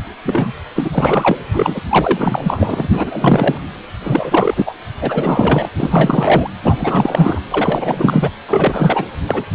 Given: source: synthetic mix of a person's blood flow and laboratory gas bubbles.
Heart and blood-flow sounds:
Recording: Doppler ultrasound of blood flow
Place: precordium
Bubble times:
0.23-0.53 s: bubbles
0.75-1.37 s: bubbles
1.52-1.81 s: bubbles
1.89-3.58 s: bubbles
4.03-4.74 s: bubbles
5.01-5.69 s: bubbles
5.76-6.50 s: bubbles
6.62-7.40 s: bubbles
7.50-8.30 s: bubbles
8.48-9.06 s: bubbles
9.26-9.45 s: bubbles
From the record:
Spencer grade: 4 (maximum detectable bubble signal sounding continuously throughout systole and diastole of every cardiac period, and overriding the amplitude of the normal cardiac signals)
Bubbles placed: anywhere in the cardiac cycle

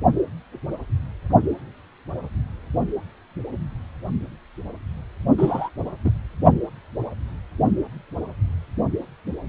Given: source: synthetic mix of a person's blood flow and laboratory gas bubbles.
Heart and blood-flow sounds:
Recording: Doppler ultrasound of blood flow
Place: precordium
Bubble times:
5.38-5.69 s: bubbles
6.04-6.10 s: bubbles
From the record:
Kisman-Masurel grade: 113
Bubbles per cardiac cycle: 1 to 2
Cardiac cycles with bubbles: 1 to 10%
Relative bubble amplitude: loud (0.450 to 0.775)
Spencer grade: 1 (occasional bubble signal discernible with the cardiac motion signal, with majority of cardiac periods free of bubbles)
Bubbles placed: only in the low amplitude regions of the cardiac cycle

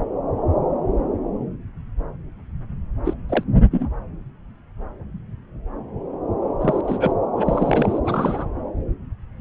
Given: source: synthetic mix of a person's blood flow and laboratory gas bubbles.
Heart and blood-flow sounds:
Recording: Doppler ultrasound of blood flow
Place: subclavian vein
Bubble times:
3.04-3.13 s: bubbles
3.29-3.44 s: bubbles
3.71-3.88 s: bubbles
6.61-6.81 s: bubbles
6.84-7.12 s: bubbles
7.35-8.00 s: bubbles
8.05-8.46 s: bubbles
From the record:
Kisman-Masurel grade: 222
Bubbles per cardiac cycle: several, 3 to 8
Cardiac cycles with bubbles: 10 to 50%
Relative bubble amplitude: moderate (0.250 to 0.450)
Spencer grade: 2 (many but less than half of the cardiac periods contain bubble signals, singularly or in groups)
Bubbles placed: anywhere in the cardiac cycle

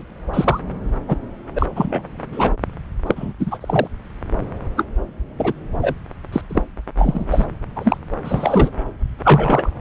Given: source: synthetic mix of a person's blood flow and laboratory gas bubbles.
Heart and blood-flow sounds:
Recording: Doppler ultrasound of blood flow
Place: subclavian vein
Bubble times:
0.33-0.60 s: bubbles
1.07-1.16 s: bubbles
1.55-1.67 s: bubbles
1.75-2.02 s: bubbles
2.32-2.53 s: bubbles
3.06-3.34 s: bubbles
3.39-3.88 s: bubbles
4.76-4.83 s: bubbles
5.37-5.53 s: bubbles
5.81-5.94 s: bubbles
6.32-6.41 s: bubbles
6.50-6.62 s: bubbles
6.96-7.26 s: bubbles
7.30-7.46 s: bubbles
7.75-7.98 s: bubbles
8.24-8.71 s: bubbles
9.23-9.70 s: bubbles
From the record:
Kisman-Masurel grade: 243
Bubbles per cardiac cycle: several, 3 to 8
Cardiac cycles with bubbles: 100%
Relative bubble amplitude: loud (0.450 to 0.775)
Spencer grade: 3 (all of the cardiac periods contain showers or single bubble signals, but not dominating or overriding the cardiac motion signals)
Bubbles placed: anywhere in the cardiac cycle

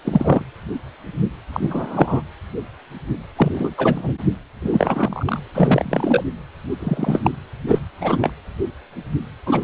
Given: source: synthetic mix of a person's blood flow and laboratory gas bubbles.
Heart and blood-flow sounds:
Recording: Doppler ultrasound of blood flow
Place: precordium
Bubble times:
0.04-0.43 s: bubbles
1.52-2.23 s: bubbles
3.36-3.75 s: bubbles
3.77-4.12 s: bubbles
4.62-5.42 s: bubbles
5.54-6.24 s: bubbles
6.79-7.30 s: bubbles
7.67-7.86 s: bubbles
8.01-8.32 s: bubbles
9.46-9.64 s: bubbles
From the record:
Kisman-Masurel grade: 233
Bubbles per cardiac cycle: several, 3 to 8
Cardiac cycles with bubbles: 50 to 99%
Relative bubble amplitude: loud (0.450 to 0.775)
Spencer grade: 3 (all of the cardiac periods contain showers or single bubble signals, but not dominating or overriding the cardiac motion signals)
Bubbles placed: anywhere in the cardiac cycle

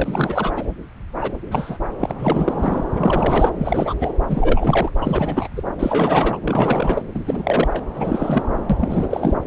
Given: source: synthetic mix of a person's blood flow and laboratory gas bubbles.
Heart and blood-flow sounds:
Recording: Doppler ultrasound of blood flow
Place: subclavian vein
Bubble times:
0.00-0.52 s: bubbles
0.55-0.64 s: bubbles
1.21-1.33 s: bubbles
1.51-1.78 s: bubbles
2.00-2.11 s: bubbles
2.19-2.83 s: bubbles
2.97-3.50 s: bubbles
3.58-3.94 s: bubbles
4.01-4.12 s: bubbles
4.29-4.90 s: bubbles
5.01-5.48 s: bubbles
5.56-5.62 s: bubbles
5.79-6.39 s: bubbles
6.44-7.02 s: bubbles
7.14-7.83 s: bubbles
7.95-8.42 s: bubbles
8.70-9.35 s: bubbles
From the record:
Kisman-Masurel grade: 343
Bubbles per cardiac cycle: rolling drumbeat, 9 or more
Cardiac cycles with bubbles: 100%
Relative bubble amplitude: loud (0.450 to 0.775)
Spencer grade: 3 (all of the cardiac periods contain showers or single bubble signals, but not dominating or overriding the cardiac motion signals)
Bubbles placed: anywhere in the cardiac cycle

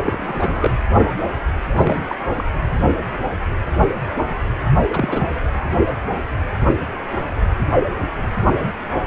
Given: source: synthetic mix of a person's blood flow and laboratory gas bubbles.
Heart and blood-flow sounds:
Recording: Doppler ultrasound of blood flow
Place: precordium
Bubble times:
0.03-0.71 s: bubbles
1.76-2.15 s: bubbles
2.36-2.44 s: bubbles
4.93-5.29 s: bubbles
From the record:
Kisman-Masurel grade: 222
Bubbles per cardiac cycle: several, 3 to 8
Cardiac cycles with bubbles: 10 to 50%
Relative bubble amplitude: moderate (0.250 to 0.450)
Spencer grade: 2 (many but less than half of the cardiac periods contain bubble signals, singularly or in groups)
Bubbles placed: anywhere in the cardiac cycle

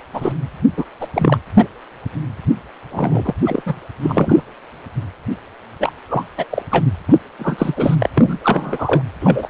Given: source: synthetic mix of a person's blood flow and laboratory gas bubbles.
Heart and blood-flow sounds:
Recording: Doppler ultrasound of blood flow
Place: precordium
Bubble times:
0.13-0.32 s: bubbles
0.76-0.85 s: bubbles
1.00-1.07 s: bubbles
1.13-1.39 s: bubbles
1.56-1.68 s: bubbles
2.91-3.33 s: bubbles
3.45-3.62 s: bubbles
3.65-3.76 s: bubbles
4.03-4.43 s: bubbles
5.80-5.92 s: bubbles
6.08-6.25 s: bubbles
6.37-6.46 s: bubbles
6.50-6.62 s: bubbles
6.71-6.86 s: bubbles
7.08-7.19 s: bubbles
7.39-7.74 s: bubbles
7.76-7.95 s: bubbles
8.00-8.09 s: bubbles
8.14-8.38 s: bubbles
8.44-9.03 s: bubbles
9.21-9.50 s: bubbles
From the record:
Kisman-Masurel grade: 333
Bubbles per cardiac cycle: rolling drumbeat, 9 or more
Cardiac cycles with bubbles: 50 to 99%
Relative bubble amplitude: loud (0.450 to 0.775)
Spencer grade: 3 (all of the cardiac periods contain showers or single bubble signals, but not dominating or overriding the cardiac motion signals)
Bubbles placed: anywhere in the cardiac cycle

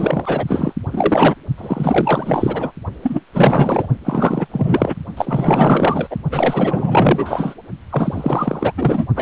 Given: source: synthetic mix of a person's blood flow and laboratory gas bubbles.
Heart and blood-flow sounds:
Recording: Doppler ultrasound of blood flow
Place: precordium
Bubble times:
0.00-0.44 s: bubbles
0.47-0.73 s: bubbles
0.90-1.35 s: bubbles
1.58-2.72 s: bubbles
3.02-3.21 s: bubbles
3.33-3.87 s: bubbles
4.04-4.47 s: bubbles
4.53-4.95 s: bubbles
5.17-6.17 s: bubbles
6.31-7.54 s: bubbles
7.90-8.72 s: bubbles
8.77-9.05 s: bubbles
9.16-9.22 s: bubbles
From the record:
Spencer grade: 4 (maximum detectable bubble signal sounding continuously throughout systole and diastole of every cardiac period, and overriding the amplitude of the normal cardiac signals)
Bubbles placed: only in the low amplitude regions of the cardiac cycle

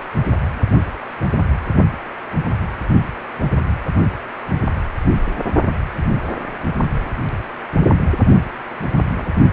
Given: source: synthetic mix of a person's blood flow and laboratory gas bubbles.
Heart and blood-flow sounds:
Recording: Doppler ultrasound of blood flow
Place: precordium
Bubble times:
9.16-9.32 s: bubbles
From the record:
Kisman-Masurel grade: 111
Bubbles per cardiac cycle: 1 to 2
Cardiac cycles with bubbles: 1 to 10%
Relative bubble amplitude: barely perceptible (0.100 to 0.250)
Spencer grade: 1 (occasional bubble signal discernible with the cardiac motion signal, with majority of cardiac periods free of bubbles)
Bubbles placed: only in the low amplitude regions of the cardiac cycle

